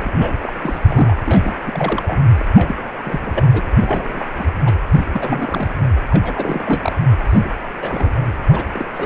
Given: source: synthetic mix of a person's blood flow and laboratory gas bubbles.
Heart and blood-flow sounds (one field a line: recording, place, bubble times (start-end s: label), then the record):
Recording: Doppler ultrasound of blood flow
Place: precordium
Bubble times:
0.00-0.09 s: bubbles
0.12-0.53 s: bubbles
0.62-0.79 s: bubbles
0.83-1.16 s: bubbles
1.26-1.62 s: bubbles
1.66-2.22 s: bubbles
2.38-2.46 s: bubbles
2.54-2.83 s: bubbles
3.05-3.32 s: bubbles
3.34-3.44 s: bubbles
3.50-4.25 s: bubbles
4.38-4.49 s: bubbles
4.65-4.73 s: bubbles
4.92-5.06 s: bubbles
5.12-5.73 s: bubbles
6.10-6.92 s: bubbles
7.30-7.48 s: bubbles
7.80-8.11 s: bubbles
8.16-8.34 s: bubbles
8.48-8.70 s: bubbles
8.74-8.86 s: bubbles
8.94-9.06 s: bubbles
From the record:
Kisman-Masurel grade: 332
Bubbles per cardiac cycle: rolling drumbeat, 9 or more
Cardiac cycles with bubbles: 50 to 99%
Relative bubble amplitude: moderate (0.250 to 0.450)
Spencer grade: 3 (all of the cardiac periods contain showers or single bubble signals, but not dominating or overriding the cardiac motion signals)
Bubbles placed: anywhere in the cardiac cycle